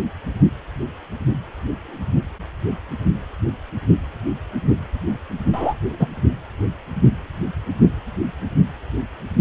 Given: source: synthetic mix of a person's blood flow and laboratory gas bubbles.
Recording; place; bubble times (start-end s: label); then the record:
Doppler ultrasound of blood flow; precordium
5.53-5.74 s: bubbles
5.99-6.08 s: bubbles
From the record:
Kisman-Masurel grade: 123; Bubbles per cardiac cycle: 1 to 2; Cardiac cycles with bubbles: 10 to 50%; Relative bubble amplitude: loud (0.450 to 0.775); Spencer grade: 2 (many but less than half of the cardiac periods contain bubble signals, singularly or in groups); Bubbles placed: anywhere in the cardiac cycle